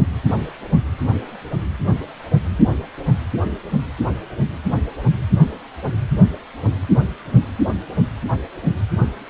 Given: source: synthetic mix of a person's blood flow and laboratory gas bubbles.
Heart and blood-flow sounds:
Doppler ultrasound of blood flow; precordium
no bubbles
From the record:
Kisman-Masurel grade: 000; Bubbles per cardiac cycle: 0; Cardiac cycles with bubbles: 0%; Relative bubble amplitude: no bubbles discernible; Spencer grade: 0 (complete lack of bubble signals)

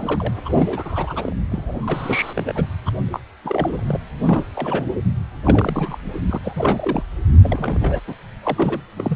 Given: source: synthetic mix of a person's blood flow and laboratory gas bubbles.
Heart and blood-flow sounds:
Doppler ultrasound of blood flow; precordium
0.00-0.31 s: bubbles
0.45-0.49 s: bubbles
0.55-1.33 s: bubbles
1.49-2.65 s: bubbles
2.85-2.90 s: bubbles
3.11-3.20 s: bubbles
3.44-4.02 s: bubbles
4.25-4.45 s: bubbles
4.55-4.85 s: bubbles
5.45-5.98 s: bubbles
6.12-6.21 s: bubbles
6.27-6.38 s: bubbles
6.44-7.03 s: bubbles
7.43-8.01 s: bubbles
8.07-8.14 s: bubbles
8.43-8.81 s: bubbles
8.96-9.16 s: bubbles
From the record:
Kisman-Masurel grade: 342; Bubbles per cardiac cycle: rolling drumbeat, 9 or more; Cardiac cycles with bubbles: 100%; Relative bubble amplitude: moderate (0.250 to 0.450); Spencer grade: 3 (all of the cardiac periods contain showers or single bubble signals, but not dominating or overriding the cardiac motion signals); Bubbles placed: anywhere in the cardiac cycle

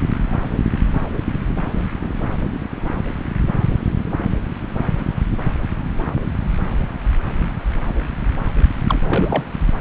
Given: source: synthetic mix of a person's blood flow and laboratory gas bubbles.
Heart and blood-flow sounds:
Doppler ultrasound of blood flow; subclavian vein
8.88-8.98 s: bubbles
9.04-9.45 s: bubbles
From the record:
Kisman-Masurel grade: 212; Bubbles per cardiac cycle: several, 3 to 8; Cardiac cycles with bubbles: 1 to 10%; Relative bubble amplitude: moderate (0.250 to 0.450); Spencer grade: 1 (occasional bubble signal discernible with the cardiac motion signal, with majority of cardiac periods free of bubbles); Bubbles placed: anywhere in the cardiac cycle

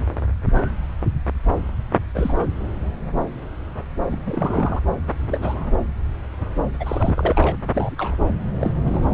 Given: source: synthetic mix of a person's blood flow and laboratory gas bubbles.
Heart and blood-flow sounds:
Doppler ultrasound of blood flow; subclavian vein
2.14-2.33 s: bubbles
2.37-2.48 s: bubbles
4.11-4.20 s: bubbles
4.25-4.80 s: bubbles
5.27-5.72 s: bubbles
6.79-7.57 s: bubbles
7.74-7.92 s: bubbles
7.97-8.16 s: bubbles
8.60-8.71 s: bubbles
8.82-9.14 s: bubbles
From the record:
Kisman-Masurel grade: 222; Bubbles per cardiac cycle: several, 3 to 8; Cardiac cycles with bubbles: 10 to 50%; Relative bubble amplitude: moderate (0.250 to 0.450); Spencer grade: 2 (many but less than half of the cardiac periods contain bubble signals, singularly or in groups); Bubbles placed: anywhere in the cardiac cycle

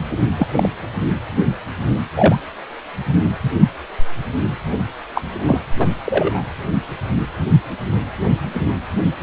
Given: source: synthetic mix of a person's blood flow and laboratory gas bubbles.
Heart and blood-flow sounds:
Doppler ultrasound of blood flow; precordium
0.39-0.47 s: bubbles
0.51-0.69 s: bubbles
2.16-2.35 s: bubbles
5.14-5.22 s: bubbles
5.45-5.58 s: bubbles
5.79-5.87 s: bubbles
6.04-6.42 s: bubbles
From the record:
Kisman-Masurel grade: 123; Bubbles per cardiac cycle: 1 to 2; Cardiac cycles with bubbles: 10 to 50%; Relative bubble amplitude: loud (0.450 to 0.775); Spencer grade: 2 (many but less than half of the cardiac periods contain bubble signals, singularly or in groups); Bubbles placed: anywhere in the cardiac cycle

